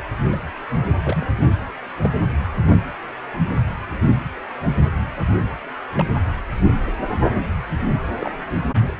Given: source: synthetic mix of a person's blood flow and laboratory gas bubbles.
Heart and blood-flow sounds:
Doppler ultrasound of blood flow; precordium
0.27-0.48 s: bubbles
1.00-1.26 s: bubbles
2.04-2.09 s: bubbles
5.96-6.05 s: bubbles
8.21-8.30 s: bubbles
From the record:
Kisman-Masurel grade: 121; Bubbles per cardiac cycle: 1 to 2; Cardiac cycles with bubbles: 10 to 50%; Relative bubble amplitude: barely perceptible (0.100 to 0.250); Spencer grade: 2 (many but less than half of the cardiac periods contain bubble signals, singularly or in groups); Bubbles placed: anywhere in the cardiac cycle

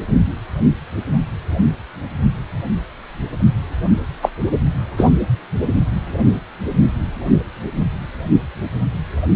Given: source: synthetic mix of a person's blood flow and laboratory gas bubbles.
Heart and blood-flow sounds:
Doppler ultrasound of blood flow; precordium
4.22-4.29 s: bubbles
4.97-5.10 s: bubbles
From the record:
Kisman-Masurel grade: 113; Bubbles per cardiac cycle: 1 to 2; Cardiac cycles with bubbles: 1 to 10%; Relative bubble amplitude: loud (0.450 to 0.775); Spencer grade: 1 (occasional bubble signal discernible with the cardiac motion signal, with majority of cardiac periods free of bubbles); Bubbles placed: anywhere in the cardiac cycle

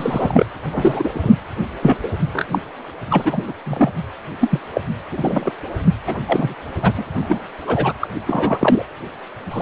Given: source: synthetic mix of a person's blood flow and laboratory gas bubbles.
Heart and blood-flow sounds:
Doppler ultrasound of blood flow; precordium
0.00-0.45 s: bubbles
0.64-1.32 s: bubbles
1.82-1.98 s: bubbles
2.02-2.09 s: bubbles
2.33-2.46 s: bubbles
2.52-2.58 s: bubbles
3.10-3.44 s: bubbles
3.46-3.53 s: bubbles
3.65-3.90 s: bubbles
4.40-4.59 s: bubbles
4.73-4.81 s: bubbles
5.11-5.51 s: bubbles
6.06-6.15 s: bubbles
6.27-6.54 s: bubbles
6.81-6.92 s: bubbles
6.97-7.03 s: bubbles
7.14-7.38 s: bubbles
7.67-7.93 s: bubbles
8.00-8.09 s: bubbles
8.26-8.86 s: bubbles
9.50-9.62 s: bubbles
From the record:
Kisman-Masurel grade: 243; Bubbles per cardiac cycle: several, 3 to 8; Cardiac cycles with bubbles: 100%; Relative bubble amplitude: loud (0.450 to 0.775); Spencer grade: 3 (all of the cardiac periods contain showers or single bubble signals, but not dominating or overriding the cardiac motion signals); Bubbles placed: anywhere in the cardiac cycle

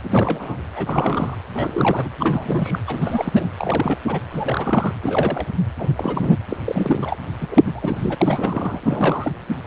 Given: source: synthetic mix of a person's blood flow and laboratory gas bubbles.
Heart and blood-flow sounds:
Doppler ultrasound of blood flow; precordium
0.03-0.57 s: bubbles
0.76-1.35 s: bubbles
1.53-2.09 s: bubbles
2.19-2.80 s: bubbles
2.87-3.50 s: bubbles
3.57-3.98 s: bubbles
4.07-4.20 s: bubbles
4.31-4.94 s: bubbles
5.02-5.45 s: bubbles
5.78-6.39 s: bubbles
6.49-6.57 s: bubbles
6.64-7.17 s: bubbles
7.40-7.47 s: bubbles
7.50-7.63 s: bubbles
7.66-7.72 s: bubbles
7.74-8.15 s: bubbles
8.17-8.80 s: bubbles
8.83-9.31 s: bubbles
From the record:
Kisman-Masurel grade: 332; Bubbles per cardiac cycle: rolling drumbeat, 9 or more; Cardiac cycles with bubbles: 50 to 99%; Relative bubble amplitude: moderate (0.250 to 0.450); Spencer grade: 3 (all of the cardiac periods contain showers or single bubble signals, but not dominating or overriding the cardiac motion signals); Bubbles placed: anywhere in the cardiac cycle

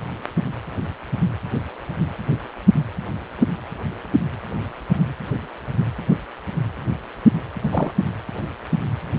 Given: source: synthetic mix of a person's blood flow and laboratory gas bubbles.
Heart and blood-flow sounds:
Doppler ultrasound of blood flow; precordium
7.62-7.92 s: bubbles
From the record:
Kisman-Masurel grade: 112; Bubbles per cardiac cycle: 1 to 2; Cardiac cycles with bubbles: 1 to 10%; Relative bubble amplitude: moderate (0.250 to 0.450); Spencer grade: 1 (occasional bubble signal discernible with the cardiac motion signal, with majority of cardiac periods free of bubbles); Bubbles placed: anywhere in the cardiac cycle

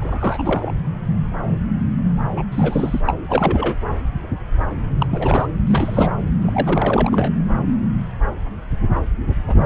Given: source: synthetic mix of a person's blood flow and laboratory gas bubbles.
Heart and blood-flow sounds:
Doppler ultrasound of blood flow; subclavian vein
0.00-0.71 s: bubbles
2.37-2.42 s: bubbles
2.52-3.00 s: bubbles
3.05-3.14 s: bubbles
3.28-3.76 s: bubbles
5.00-5.07 s: bubbles
5.10-5.48 s: bubbles
5.67-6.12 s: bubbles
6.41-7.32 s: bubbles
9.47-9.54 s: bubbles
9.59-9.66 s: bubbles
From the record:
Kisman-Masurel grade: 332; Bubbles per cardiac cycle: rolling drumbeat, 9 or more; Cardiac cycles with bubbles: 50 to 99%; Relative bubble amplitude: moderate (0.250 to 0.450); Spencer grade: 3 (all of the cardiac periods contain showers or single bubble signals, but not dominating or overriding the cardiac motion signals); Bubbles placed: anywhere in the cardiac cycle

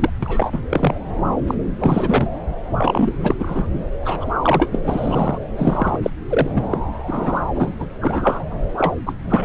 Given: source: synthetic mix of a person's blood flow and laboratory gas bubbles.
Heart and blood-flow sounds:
Doppler ultrasound of blood flow; subclavian vein
0.00-0.10 s: bubbles
0.23-0.61 s: bubbles
0.69-0.95 s: bubbles
1.47-1.55 s: bubbles
1.78-2.27 s: bubbles
2.75-3.16 s: bubbles
3.22-3.34 s: bubbles
3.39-3.67 s: bubbles
4.01-4.27 s: bubbles
4.42-4.79 s: bubbles
4.83-5.38 s: bubbles
5.58-5.98 s: bubbles
6.02-6.10 s: bubbles
6.29-6.48 s: bubbles
6.55-6.63 s: bubbles
6.71-6.79 s: bubbles
7.07-7.41 s: bubbles
7.46-7.87 s: bubbles
8.01-8.45 s: bubbles
8.51-8.64 s: bubbles
8.77-8.93 s: bubbles
9.05-9.12 s: bubbles
9.24-9.45 s: bubbles
From the record:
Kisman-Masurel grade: 342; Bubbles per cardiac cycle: rolling drumbeat, 9 or more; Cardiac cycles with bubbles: 100%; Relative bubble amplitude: moderate (0.250 to 0.450); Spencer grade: 3 (all of the cardiac periods contain showers or single bubble signals, but not dominating or overriding the cardiac motion signals); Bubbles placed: anywhere in the cardiac cycle

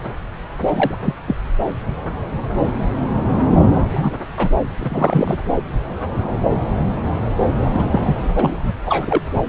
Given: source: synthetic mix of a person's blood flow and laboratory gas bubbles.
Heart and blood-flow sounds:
Doppler ultrasound of blood flow; subclavian vein
0.65-0.99 s: bubbles
1.02-1.14 s: bubbles
1.27-1.36 s: bubbles
3.73-3.81 s: bubbles
3.90-4.16 s: bubbles
4.37-4.50 s: bubbles
4.79-5.38 s: bubbles
7.61-7.67 s: bubbles
7.73-8.15 s: bubbles
8.36-8.73 s: bubbles
8.86-9.21 s: bubbles
From the record:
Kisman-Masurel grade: 222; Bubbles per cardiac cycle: several, 3 to 8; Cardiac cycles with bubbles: 10 to 50%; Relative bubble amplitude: moderate (0.250 to 0.450); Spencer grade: 2 (many but less than half of the cardiac periods contain bubble signals, singularly or in groups); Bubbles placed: anywhere in the cardiac cycle

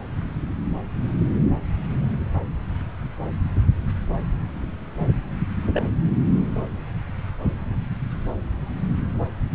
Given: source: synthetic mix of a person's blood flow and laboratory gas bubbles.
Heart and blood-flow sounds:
Doppler ultrasound of blood flow; subclavian vein
5.73-5.83 s: bubbles
From the record:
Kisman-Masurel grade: 112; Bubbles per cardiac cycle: 1 to 2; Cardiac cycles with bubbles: 1 to 10%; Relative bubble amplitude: moderate (0.250 to 0.450); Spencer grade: 1 (occasional bubble signal discernible with the cardiac motion signal, with majority of cardiac periods free of bubbles); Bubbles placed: anywhere in the cardiac cycle

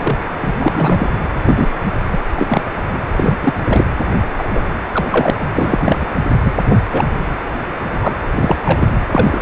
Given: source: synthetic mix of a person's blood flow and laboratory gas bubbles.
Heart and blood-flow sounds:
Doppler ultrasound of blood flow; precordium
0.00-0.18 s: bubbles
0.42-0.53 s: bubbles
0.59-1.09 s: bubbles
1.45-1.67 s: bubbles
2.11-2.17 s: bubbles
2.36-2.61 s: bubbles
2.92-2.98 s: bubbles
3.17-3.38 s: bubbles
3.42-3.53 s: bubbles
3.69-3.85 s: bubbles
4.37-4.44 s: bubbles
4.50-4.79 s: bubbles
4.92-5.31 s: bubbles
5.41-6.06 s: bubbles
6.43-6.53 s: bubbles
6.70-6.77 s: bubbles
6.92-7.04 s: bubbles
7.83-8.19 s: bubbles
8.36-8.57 s: bubbles
8.64-8.96 s: bubbles
9.11-9.42 s: bubbles
From the record:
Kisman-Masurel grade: 243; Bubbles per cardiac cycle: several, 3 to 8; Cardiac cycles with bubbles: 100%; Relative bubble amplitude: loud (0.450 to 0.775); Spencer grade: 3 (all of the cardiac periods contain showers or single bubble signals, but not dominating or overriding the cardiac motion signals); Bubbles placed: anywhere in the cardiac cycle

